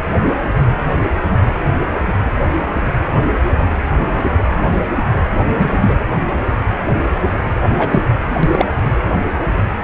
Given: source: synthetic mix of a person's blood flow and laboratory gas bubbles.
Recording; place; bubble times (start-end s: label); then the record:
Doppler ultrasound of blood flow; precordium
5.49-5.94 s: bubbles
7.78-8.05 s: bubbles
8.43-8.66 s: bubbles
From the record:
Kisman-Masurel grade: 123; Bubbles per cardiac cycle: 1 to 2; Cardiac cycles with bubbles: 10 to 50%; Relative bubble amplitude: loud (0.450 to 0.775); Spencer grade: 2 (many but less than half of the cardiac periods contain bubble signals, singularly or in groups); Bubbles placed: anywhere in the cardiac cycle